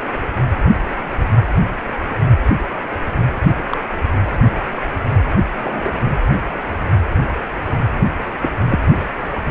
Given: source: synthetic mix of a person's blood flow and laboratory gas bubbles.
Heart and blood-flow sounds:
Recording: Doppler ultrasound of blood flow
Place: precordium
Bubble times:
3.70-3.78 s: bubbles
5.63-5.90 s: bubbles
8.42-8.50 s: bubbles
8.69-8.79 s: bubbles
From the record:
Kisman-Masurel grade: 122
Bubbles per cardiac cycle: 1 to 2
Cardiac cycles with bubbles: 10 to 50%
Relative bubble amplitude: moderate (0.250 to 0.450)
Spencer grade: 2 (many but less than half of the cardiac periods contain bubble signals, singularly or in groups)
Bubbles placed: only in the low amplitude regions of the cardiac cycle

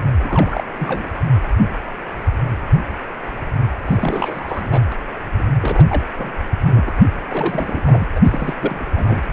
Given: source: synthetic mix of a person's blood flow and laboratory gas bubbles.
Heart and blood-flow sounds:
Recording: Doppler ultrasound of blood flow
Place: precordium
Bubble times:
0.21-0.67 s: bubbles
0.78-1.13 s: bubbles
3.86-4.83 s: bubbles
4.91-4.96 s: bubbles
5.38-5.43 s: bubbles
5.61-6.02 s: bubbles
6.17-6.33 s: bubbles
6.66-6.93 s: bubbles
7.29-7.82 s: bubbles
7.84-8.08 s: bubbles
8.15-8.20 s: bubbles
8.24-8.54 s: bubbles
8.60-8.86 s: bubbles
8.96-9.24 s: bubbles
From the record:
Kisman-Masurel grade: 332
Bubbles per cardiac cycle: rolling drumbeat, 9 or more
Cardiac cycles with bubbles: 50 to 99%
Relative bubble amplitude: moderate (0.250 to 0.450)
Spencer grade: 3 (all of the cardiac periods contain showers or single bubble signals, but not dominating or overriding the cardiac motion signals)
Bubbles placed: anywhere in the cardiac cycle

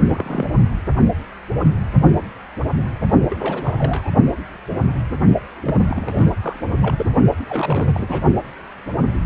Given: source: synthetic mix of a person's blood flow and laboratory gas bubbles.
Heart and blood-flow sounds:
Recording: Doppler ultrasound of blood flow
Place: precordium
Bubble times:
0.00-0.03 s: bubbles
0.08-0.47 s: bubbles
3.30-4.11 s: bubbles
5.64-6.35 s: bubbles
6.42-6.58 s: bubbles
6.68-6.77 s: bubbles
6.81-7.05 s: bubbles
7.49-8.22 s: bubbles
From the record:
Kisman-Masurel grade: 332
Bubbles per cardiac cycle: rolling drumbeat, 9 or more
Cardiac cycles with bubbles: 50 to 99%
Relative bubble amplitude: moderate (0.250 to 0.450)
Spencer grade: 3 (all of the cardiac periods contain showers or single bubble signals, but not dominating or overriding the cardiac motion signals)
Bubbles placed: only in the low amplitude regions of the cardiac cycle

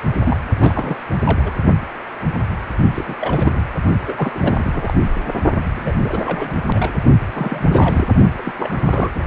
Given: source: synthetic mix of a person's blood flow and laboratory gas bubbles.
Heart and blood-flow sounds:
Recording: Doppler ultrasound of blood flow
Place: precordium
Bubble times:
0.25-0.38 s: bubbles
0.55-0.97 s: bubbles
1.25-1.42 s: bubbles
1.45-1.53 s: bubbles
2.94-3.16 s: bubbles
3.21-3.64 s: bubbles
4.06-4.93 s: bubbles
5.64-5.92 s: bubbles
6.04-6.60 s: bubbles
6.72-6.93 s: bubbles
7.35-8.05 s: bubbles
8.38-8.42 s: bubbles
8.45-8.53 s: bubbles
8.56-9.10 s: bubbles
9.15-9.25 s: bubbles
From the record:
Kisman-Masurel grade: 332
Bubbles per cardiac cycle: rolling drumbeat, 9 or more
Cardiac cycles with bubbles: 50 to 99%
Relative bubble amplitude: moderate (0.250 to 0.450)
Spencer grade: 3 (all of the cardiac periods contain showers or single bubble signals, but not dominating or overriding the cardiac motion signals)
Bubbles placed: only in the low amplitude regions of the cardiac cycle

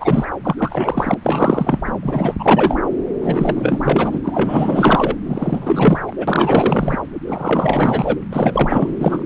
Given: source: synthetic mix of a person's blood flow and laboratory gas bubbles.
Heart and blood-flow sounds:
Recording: Doppler ultrasound of blood flow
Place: subclavian vein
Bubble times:
0.00-0.25 s: bubbles
0.43-1.14 s: bubbles
1.23-1.82 s: bubbles
1.87-1.92 s: bubbles
2.02-2.35 s: bubbles
2.39-2.77 s: bubbles
3.21-4.20 s: bubbles
4.23-5.15 s: bubbles
5.26-5.99 s: bubbles
6.08-6.12 s: bubbles
6.18-7.00 s: bubbles
7.26-8.16 s: bubbles
8.29-8.95 s: bubbles
9.00-9.23 s: bubbles
From the record:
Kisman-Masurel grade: 444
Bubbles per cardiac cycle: continuous sound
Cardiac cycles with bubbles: 100%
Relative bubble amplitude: maximal (0.775 to 0.999)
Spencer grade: 4 (maximum detectable bubble signal sounding continuously throughout systole and diastole of every cardiac period, and overriding the amplitude of the normal cardiac signals)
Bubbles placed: anywhere in the cardiac cycle

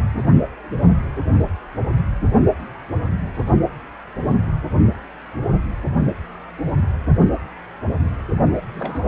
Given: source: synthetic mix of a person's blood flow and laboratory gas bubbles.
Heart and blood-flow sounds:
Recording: Doppler ultrasound of blood flow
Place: precordium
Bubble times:
8.71-9.08 s: bubbles
From the record:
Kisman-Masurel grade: 211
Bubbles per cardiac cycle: several, 3 to 8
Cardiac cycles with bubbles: 1 to 10%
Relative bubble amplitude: barely perceptible (0.100 to 0.250)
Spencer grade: 1 (occasional bubble signal discernible with the cardiac motion signal, with majority of cardiac periods free of bubbles)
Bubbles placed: only in the low amplitude regions of the cardiac cycle

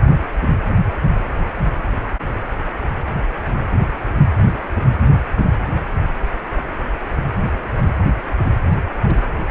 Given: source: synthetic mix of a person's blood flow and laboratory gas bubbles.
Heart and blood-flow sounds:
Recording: Doppler ultrasound of blood flow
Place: precordium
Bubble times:
8.71-8.75 s: bubbles
9.03-9.17 s: bubbles
From the record:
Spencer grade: 1 (occasional bubble signal discernible with the cardiac motion signal, with majority of cardiac periods free of bubbles)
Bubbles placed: anywhere in the cardiac cycle

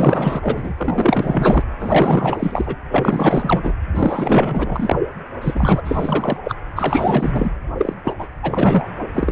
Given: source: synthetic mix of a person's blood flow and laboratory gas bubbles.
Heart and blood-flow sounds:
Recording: Doppler ultrasound of blood flow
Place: precordium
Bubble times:
0.00-0.73 s: bubbles
0.77-1.66 s: bubbles
1.79-2.75 s: bubbles
2.91-3.74 s: bubbles
3.95-4.97 s: bubbles
5.42-6.37 s: bubbles
6.44-6.55 s: bubbles
6.75-7.52 s: bubbles
7.77-7.94 s: bubbles
8.04-8.15 s: bubbles
8.18-8.27 s: bubbles
8.42-8.88 s: bubbles
9.13-9.32 s: bubbles
From the record:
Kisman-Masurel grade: 444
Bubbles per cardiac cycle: continuous sound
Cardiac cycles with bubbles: 100%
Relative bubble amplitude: maximal (0.775 to 0.999)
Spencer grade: 4 (maximum detectable bubble signal sounding continuously throughout systole and diastole of every cardiac period, and overriding the amplitude of the normal cardiac signals)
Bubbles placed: anywhere in the cardiac cycle

